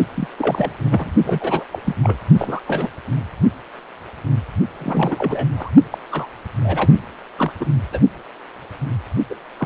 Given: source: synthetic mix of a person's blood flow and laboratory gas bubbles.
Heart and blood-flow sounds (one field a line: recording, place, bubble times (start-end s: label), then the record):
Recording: Doppler ultrasound of blood flow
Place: precordium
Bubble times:
0.14-0.28 s: bubbles
0.38-0.71 s: bubbles
0.79-1.12 s: bubbles
1.24-1.64 s: bubbles
1.72-1.95 s: bubbles
2.03-2.18 s: bubbles
2.38-2.60 s: bubbles
2.67-2.89 s: bubbles
4.80-5.46 s: bubbles
5.58-5.71 s: bubbles
5.91-5.98 s: bubbles
6.11-6.27 s: bubbles
6.61-6.98 s: bubbles
7.38-7.52 s: bubbles
7.60-7.66 s: bubbles
7.92-7.99 s: bubbles
9.29-9.34 s: bubbles
9.57-9.66 s: bubbles
From the record:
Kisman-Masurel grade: 332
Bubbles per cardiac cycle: rolling drumbeat, 9 or more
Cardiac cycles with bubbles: 50 to 99%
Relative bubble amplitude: moderate (0.250 to 0.450)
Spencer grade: 3 (all of the cardiac periods contain showers or single bubble signals, but not dominating or overriding the cardiac motion signals)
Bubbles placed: only in the low amplitude regions of the cardiac cycle